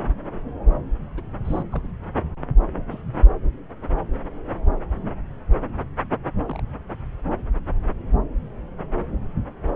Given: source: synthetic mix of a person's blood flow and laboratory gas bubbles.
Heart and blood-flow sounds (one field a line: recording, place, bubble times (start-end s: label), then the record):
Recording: Doppler ultrasound of blood flow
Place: subclavian vein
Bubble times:
1.17-1.22 s: bubbles
1.45-1.62 s: bubbles
1.72-1.88 s: bubbles
2.90-3.04 s: bubbles
6.46-6.62 s: bubbles
From the record:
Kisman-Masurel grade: 121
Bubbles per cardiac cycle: 1 to 2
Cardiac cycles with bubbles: 10 to 50%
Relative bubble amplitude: barely perceptible (0.100 to 0.250)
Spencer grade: 2 (many but less than half of the cardiac periods contain bubble signals, singularly or in groups)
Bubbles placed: anywhere in the cardiac cycle